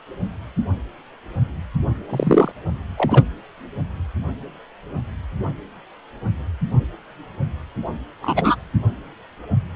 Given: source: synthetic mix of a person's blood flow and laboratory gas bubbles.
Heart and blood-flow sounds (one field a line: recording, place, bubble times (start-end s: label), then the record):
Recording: Doppler ultrasound of blood flow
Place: precordium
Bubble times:
2.09-2.52 s: bubbles
2.97-3.25 s: bubbles
8.21-8.56 s: bubbles
From the record:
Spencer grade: 2 (many but less than half of the cardiac periods contain bubble signals, singularly or in groups)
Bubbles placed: anywhere in the cardiac cycle